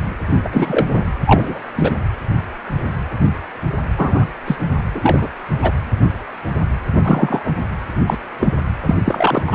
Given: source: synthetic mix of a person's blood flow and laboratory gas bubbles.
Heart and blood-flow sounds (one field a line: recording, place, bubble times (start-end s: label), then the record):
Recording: Doppler ultrasound of blood flow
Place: precordium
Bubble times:
0.44-0.86 s: bubbles
0.95-1.04 s: bubbles
1.26-1.59 s: bubbles
1.76-1.91 s: bubbles
3.97-4.25 s: bubbles
4.46-4.55 s: bubbles
4.94-5.29 s: bubbles
5.62-5.71 s: bubbles
7.03-7.42 s: bubbles
7.45-7.53 s: bubbles
8.06-8.18 s: bubbles
8.39-8.53 s: bubbles
8.86-8.95 s: bubbles
9.04-9.44 s: bubbles
9.47-9.55 s: bubbles
From the record:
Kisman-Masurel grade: 233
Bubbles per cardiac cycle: several, 3 to 8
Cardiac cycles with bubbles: 50 to 99%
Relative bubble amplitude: loud (0.450 to 0.775)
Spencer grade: 3 (all of the cardiac periods contain showers or single bubble signals, but not dominating or overriding the cardiac motion signals)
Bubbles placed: anywhere in the cardiac cycle